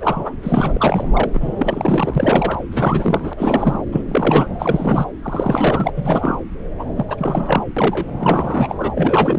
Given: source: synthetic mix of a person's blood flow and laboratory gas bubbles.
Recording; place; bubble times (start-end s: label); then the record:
Doppler ultrasound of blood flow; subclavian vein
0.00-0.35 s: bubbles
0.43-1.08 s: bubbles
1.12-1.30 s: bubbles
1.34-2.58 s: bubbles
2.71-3.33 s: bubbles
3.37-3.83 s: bubbles
3.92-4.01 s: bubbles
4.08-4.47 s: bubbles
4.59-5.05 s: bubbles
5.22-5.91 s: bubbles
5.96-6.37 s: bubbles
6.79-6.84 s: bubbles
6.95-7.05 s: bubbles
7.08-7.63 s: bubbles
7.76-8.07 s: bubbles
8.20-8.76 s: bubbles
8.79-8.92 s: bubbles
8.96-9.39 s: bubbles
From the record:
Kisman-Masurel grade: 343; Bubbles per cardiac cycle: rolling drumbeat, 9 or more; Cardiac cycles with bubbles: 100%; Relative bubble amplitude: loud (0.450 to 0.775); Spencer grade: 3 (all of the cardiac periods contain showers or single bubble signals, but not dominating or overriding the cardiac motion signals); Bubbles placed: anywhere in the cardiac cycle